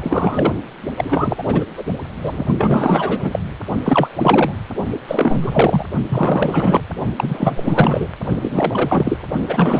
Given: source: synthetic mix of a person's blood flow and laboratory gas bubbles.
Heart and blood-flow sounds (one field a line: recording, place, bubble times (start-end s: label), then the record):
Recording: Doppler ultrasound of blood flow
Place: precordium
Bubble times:
0.00-0.53 s: bubbles
0.97-1.43 s: bubbles
1.46-1.64 s: bubbles
1.77-1.84 s: bubbles
2.24-2.47 s: bubbles
2.58-3.40 s: bubbles
3.83-4.07 s: bubbles
4.17-4.52 s: bubbles
5.07-5.85 s: bubbles
6.08-6.83 s: bubbles
7.17-8.07 s: bubbles
8.29-8.37 s: bubbles
8.42-9.19 s: bubbles
9.48-9.80 s: bubbles
From the record:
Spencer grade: 4 (maximum detectable bubble signal sounding continuously throughout systole and diastole of every cardiac period, and overriding the amplitude of the normal cardiac signals)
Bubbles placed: only in the low amplitude regions of the cardiac cycle